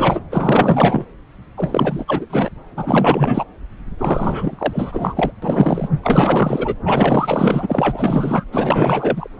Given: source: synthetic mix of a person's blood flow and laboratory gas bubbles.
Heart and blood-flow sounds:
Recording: Doppler ultrasound of blood flow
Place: subclavian vein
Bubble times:
0.00-0.21 s: bubbles
0.31-1.06 s: bubbles
1.57-2.50 s: bubbles
2.77-3.45 s: bubbles
3.98-5.32 s: bubbles
5.42-5.88 s: bubbles
6.03-6.75 s: bubbles
6.85-8.44 s: bubbles
8.52-9.29 s: bubbles
From the record:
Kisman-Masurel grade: 444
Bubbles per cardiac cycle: continuous sound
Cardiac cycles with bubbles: 100%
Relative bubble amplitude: maximal (0.775 to 0.999)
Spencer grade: 4 (maximum detectable bubble signal sounding continuously throughout systole and diastole of every cardiac period, and overriding the amplitude of the normal cardiac signals)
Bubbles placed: anywhere in the cardiac cycle

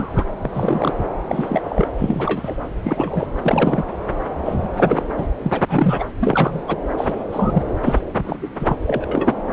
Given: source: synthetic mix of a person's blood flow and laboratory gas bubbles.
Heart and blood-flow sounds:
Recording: Doppler ultrasound of blood flow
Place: subclavian vein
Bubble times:
0.00-0.25 s: bubbles
0.42-0.50 s: bubbles
0.54-0.92 s: bubbles
1.28-1.61 s: bubbles
1.64-1.86 s: bubbles
1.97-2.55 s: bubbles
2.84-3.27 s: bubbles
3.43-3.84 s: bubbles
4.45-4.69 s: bubbles
4.74-5.05 s: bubbles
5.17-5.26 s: bubbles
5.43-5.61 s: bubbles
5.68-6.04 s: bubbles
6.20-6.62 s: bubbles
6.68-6.78 s: bubbles
6.97-7.13 s: bubbles
7.32-7.63 s: bubbles
7.85-7.99 s: bubbles
8.23-8.39 s: bubbles
8.42-8.47 s: bubbles
8.59-8.76 s: bubbles
8.86-9.34 s: bubbles
From the record:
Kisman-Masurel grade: 242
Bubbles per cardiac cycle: several, 3 to 8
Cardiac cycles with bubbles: 100%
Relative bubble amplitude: moderate (0.250 to 0.450)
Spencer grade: 3 (all of the cardiac periods contain showers or single bubble signals, but not dominating or overriding the cardiac motion signals)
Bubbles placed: anywhere in the cardiac cycle

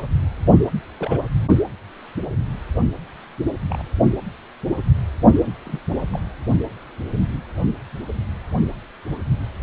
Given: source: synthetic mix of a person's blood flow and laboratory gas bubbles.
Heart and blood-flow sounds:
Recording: Doppler ultrasound of blood flow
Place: precordium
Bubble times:
0.98-1.20 s: bubbles
3.68-3.83 s: bubbles
5.65-5.79 s: bubbles
6.11-6.20 s: bubbles
From the record:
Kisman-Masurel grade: 121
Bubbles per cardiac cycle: 1 to 2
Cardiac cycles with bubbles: 10 to 50%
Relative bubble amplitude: barely perceptible (0.100 to 0.250)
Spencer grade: 2 (many but less than half of the cardiac periods contain bubble signals, singularly or in groups)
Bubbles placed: only in the low amplitude regions of the cardiac cycle

